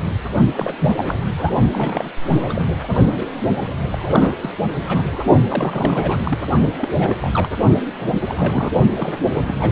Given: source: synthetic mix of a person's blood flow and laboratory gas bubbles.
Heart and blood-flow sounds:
Doppler ultrasound of blood flow; precordium
0.00-0.05 s: bubbles
0.52-0.73 s: bubbles
0.78-1.28 s: bubbles
1.37-1.51 s: bubbles
1.72-2.08 s: bubbles
2.28-2.69 s: bubbles
2.83-2.88 s: bubbles
3.08-3.14 s: bubbles
3.17-3.27 s: bubbles
3.91-3.97 s: bubbles
4.06-4.35 s: bubbles
4.40-4.54 s: bubbles
4.88-5.25 s: bubbles
5.48-6.38 s: bubbles
6.79-6.89 s: bubbles
6.97-7.16 s: bubbles
7.21-7.49 s: bubbles
7.89-7.94 s: bubbles
7.96-8.24 s: bubbles
8.28-8.73 s: bubbles
8.95-9.21 s: bubbles
9.35-9.41 s: bubbles
9.47-9.55 s: bubbles
9.60-9.72 s: bubbles
From the record:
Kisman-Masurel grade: 332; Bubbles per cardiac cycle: rolling drumbeat, 9 or more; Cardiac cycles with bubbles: 50 to 99%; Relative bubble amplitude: moderate (0.250 to 0.450); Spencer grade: 3 (all of the cardiac periods contain showers or single bubble signals, but not dominating or overriding the cardiac motion signals); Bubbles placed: only in the low amplitude regions of the cardiac cycle

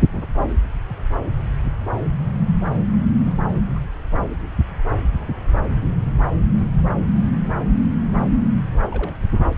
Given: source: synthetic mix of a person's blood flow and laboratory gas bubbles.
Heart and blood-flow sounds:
Doppler ultrasound of blood flow; subclavian vein
3.24-3.36 s: bubbles
3.75-3.79 s: bubbles
4.90-4.94 s: bubbles
6.48-6.75 s: bubbles
8.64-8.79 s: bubbles
8.90-9.15 s: bubbles
From the record:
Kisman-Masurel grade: 121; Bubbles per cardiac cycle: 1 to 2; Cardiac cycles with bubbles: 10 to 50%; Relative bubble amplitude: barely perceptible (0.100 to 0.250); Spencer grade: 2 (many but less than half of the cardiac periods contain bubble signals, singularly or in groups); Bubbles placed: anywhere in the cardiac cycle

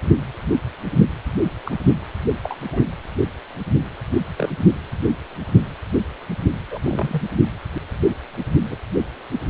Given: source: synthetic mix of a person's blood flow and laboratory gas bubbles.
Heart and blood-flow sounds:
Doppler ultrasound of blood flow; precordium
1.65-1.76 s: bubbles
2.43-2.56 s: bubbles
2.73-2.81 s: bubbles
4.37-4.50 s: bubbles
6.71-6.80 s: bubbles
6.84-7.23 s: bubbles
8.70-8.76 s: bubbles
From the record:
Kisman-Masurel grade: 122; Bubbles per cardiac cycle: 1 to 2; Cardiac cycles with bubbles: 10 to 50%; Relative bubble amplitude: moderate (0.250 to 0.450); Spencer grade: 2 (many but less than half of the cardiac periods contain bubble signals, singularly or in groups); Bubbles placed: anywhere in the cardiac cycle

